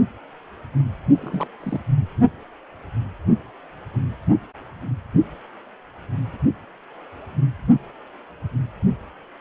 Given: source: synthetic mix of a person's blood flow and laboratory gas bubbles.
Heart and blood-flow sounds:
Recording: Doppler ultrasound of blood flow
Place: precordium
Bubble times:
1.08-1.48 s: bubbles
1.60-1.79 s: bubbles
From the record:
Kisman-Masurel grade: 211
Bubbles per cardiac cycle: several, 3 to 8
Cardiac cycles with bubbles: 1 to 10%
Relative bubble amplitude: barely perceptible (0.100 to 0.250)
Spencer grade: 1 (occasional bubble signal discernible with the cardiac motion signal, with majority of cardiac periods free of bubbles)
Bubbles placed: anywhere in the cardiac cycle

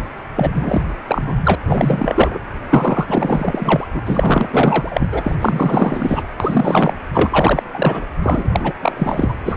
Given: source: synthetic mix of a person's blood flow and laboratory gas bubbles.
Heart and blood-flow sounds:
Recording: Doppler ultrasound of blood flow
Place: precordium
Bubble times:
0.36-0.82 s: bubbles
1.07-1.55 s: bubbles
1.66-2.39 s: bubbles
2.70-3.87 s: bubbles
3.94-5.08 s: bubbles
5.12-5.35 s: bubbles
5.40-6.25 s: bubbles
6.40-6.93 s: bubbles
7.13-7.63 s: bubbles
7.73-8.07 s: bubbles
8.22-8.73 s: bubbles
8.82-8.93 s: bubbles
8.96-9.36 s: bubbles
9.45-9.57 s: bubbles
From the record:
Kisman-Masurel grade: 444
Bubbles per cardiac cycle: continuous sound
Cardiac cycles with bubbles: 100%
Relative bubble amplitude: maximal (0.775 to 0.999)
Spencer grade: 4 (maximum detectable bubble signal sounding continuously throughout systole and diastole of every cardiac period, and overriding the amplitude of the normal cardiac signals)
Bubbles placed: anywhere in the cardiac cycle

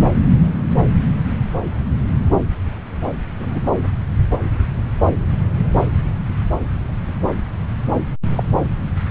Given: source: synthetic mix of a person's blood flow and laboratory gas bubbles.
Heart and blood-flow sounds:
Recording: Doppler ultrasound of blood flow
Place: subclavian vein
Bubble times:
3.38-3.71 s: bubbles
8.36-8.43 s: bubbles
From the record:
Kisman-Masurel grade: 113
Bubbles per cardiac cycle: 1 to 2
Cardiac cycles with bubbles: 1 to 10%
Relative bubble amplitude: loud (0.450 to 0.775)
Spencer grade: 1 (occasional bubble signal discernible with the cardiac motion signal, with majority of cardiac periods free of bubbles)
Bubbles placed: anywhere in the cardiac cycle

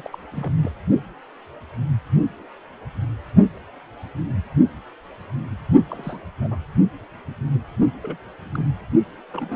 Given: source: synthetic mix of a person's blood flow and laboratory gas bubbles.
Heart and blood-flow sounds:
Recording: Doppler ultrasound of blood flow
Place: precordium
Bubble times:
0.00-0.09 s: bubbles
0.11-0.19 s: bubbles
0.31-0.58 s: bubbles
0.62-0.72 s: bubbles
5.86-6.26 s: bubbles
6.41-6.58 s: bubbles
8.02-8.17 s: bubbles
8.53-8.65 s: bubbles
9.32-9.56 s: bubbles
From the record:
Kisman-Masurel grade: 221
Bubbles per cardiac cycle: several, 3 to 8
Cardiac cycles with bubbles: 10 to 50%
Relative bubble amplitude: barely perceptible (0.100 to 0.250)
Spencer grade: 2 (many but less than half of the cardiac periods contain bubble signals, singularly or in groups)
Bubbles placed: only in the low amplitude regions of the cardiac cycle

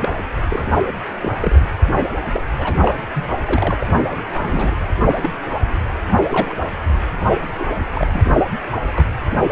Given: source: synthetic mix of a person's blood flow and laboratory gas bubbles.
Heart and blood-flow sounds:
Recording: Doppler ultrasound of blood flow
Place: precordium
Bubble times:
0.00-0.09 s: bubbles
0.49-0.67 s: bubbles
1.21-1.33 s: bubbles
1.40-1.61 s: bubbles
2.33-2.42 s: bubbles
2.57-2.75 s: bubbles
2.80-2.94 s: bubbles
3.15-3.28 s: bubbles
3.45-3.74 s: bubbles
3.79-3.87 s: bubbles
3.91-4.25 s: bubbles
4.38-4.78 s: bubbles
5.08-5.31 s: bubbles
6.30-6.54 s: bubbles
7.58-7.65 s: bubbles
7.93-8.07 s: bubbles
8.10-8.24 s: bubbles
8.96-9.06 s: bubbles
From the record:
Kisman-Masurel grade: 242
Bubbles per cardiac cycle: several, 3 to 8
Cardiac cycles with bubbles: 100%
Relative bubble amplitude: moderate (0.250 to 0.450)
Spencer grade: 3 (all of the cardiac periods contain showers or single bubble signals, but not dominating or overriding the cardiac motion signals)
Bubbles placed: anywhere in the cardiac cycle

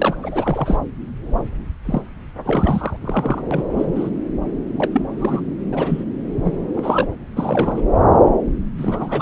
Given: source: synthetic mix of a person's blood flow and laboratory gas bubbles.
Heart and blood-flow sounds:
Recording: Doppler ultrasound of blood flow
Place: subclavian vein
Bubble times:
0.00-0.15 s: bubbles
0.22-0.78 s: bubbles
1.85-2.02 s: bubbles
2.45-2.97 s: bubbles
3.01-3.45 s: bubbles
3.51-3.64 s: bubbles
3.69-4.09 s: bubbles
4.77-5.02 s: bubbles
5.17-5.41 s: bubbles
5.71-6.04 s: bubbles
6.44-6.65 s: bubbles
6.75-7.07 s: bubbles
7.36-7.82 s: bubbles
8.77-9.21 s: bubbles
From the record:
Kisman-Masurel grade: 342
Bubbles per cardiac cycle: rolling drumbeat, 9 or more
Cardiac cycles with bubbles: 100%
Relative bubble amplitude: moderate (0.250 to 0.450)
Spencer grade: 3 (all of the cardiac periods contain showers or single bubble signals, but not dominating or overriding the cardiac motion signals)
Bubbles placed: anywhere in the cardiac cycle

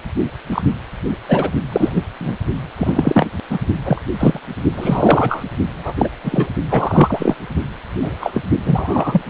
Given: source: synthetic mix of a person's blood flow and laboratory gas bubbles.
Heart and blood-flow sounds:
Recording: Doppler ultrasound of blood flow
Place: precordium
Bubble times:
0.52-0.62 s: bubbles
1.28-1.51 s: bubbles
1.72-2.03 s: bubbles
2.20-2.33 s: bubbles
2.77-3.27 s: bubbles
3.50-3.58 s: bubbles
3.84-4.02 s: bubbles
4.20-4.39 s: bubbles
4.75-5.44 s: bubbles
5.72-6.08 s: bubbles
6.24-6.51 s: bubbles
6.70-7.34 s: bubbles
8.02-8.16 s: bubbles
8.19-8.41 s: bubbles
8.65-9.21 s: bubbles
From the record:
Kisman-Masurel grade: 243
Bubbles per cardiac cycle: several, 3 to 8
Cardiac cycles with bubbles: 100%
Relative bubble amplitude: loud (0.450 to 0.775)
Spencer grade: 3 (all of the cardiac periods contain showers or single bubble signals, but not dominating or overriding the cardiac motion signals)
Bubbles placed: only in the low amplitude regions of the cardiac cycle

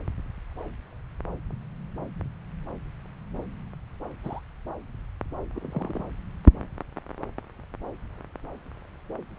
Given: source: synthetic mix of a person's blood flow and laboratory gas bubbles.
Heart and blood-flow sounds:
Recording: Doppler ultrasound of blood flow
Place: subclavian vein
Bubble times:
4.24-4.40 s: bubbles
5.55-6.04 s: bubbles
From the record:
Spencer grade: 2 (many but less than half of the cardiac periods contain bubble signals, singularly or in groups)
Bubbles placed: anywhere in the cardiac cycle

